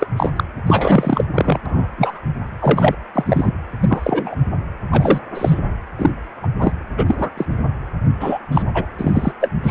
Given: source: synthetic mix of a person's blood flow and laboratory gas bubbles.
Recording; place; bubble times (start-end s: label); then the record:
Doppler ultrasound of blood flow; precordium
0.00-0.07 s: bubbles
0.16-0.29 s: bubbles
0.36-0.43 s: bubbles
0.67-1.25 s: bubbles
1.35-1.58 s: bubbles
1.66-1.88 s: bubbles
1.97-2.21 s: bubbles
2.60-2.95 s: bubbles
3.15-3.54 s: bubbles
3.81-4.36 s: bubbles
4.91-5.20 s: bubbles
5.34-5.60 s: bubbles
5.98-6.11 s: bubbles
6.42-6.47 s: bubbles
6.60-6.72 s: bubbles
6.96-7.29 s: bubbles
7.37-7.46 s: bubbles
8.20-8.39 s: bubbles
8.51-8.63 s: bubbles
8.73-8.86 s: bubbles
8.98-9.32 s: bubbles
9.40-9.50 s: bubbles
9.63-9.71 s: bubbles
From the record:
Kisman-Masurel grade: 243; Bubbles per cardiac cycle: several, 3 to 8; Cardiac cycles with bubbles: 100%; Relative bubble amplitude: loud (0.450 to 0.775); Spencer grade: 3 (all of the cardiac periods contain showers or single bubble signals, but not dominating or overriding the cardiac motion signals); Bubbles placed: anywhere in the cardiac cycle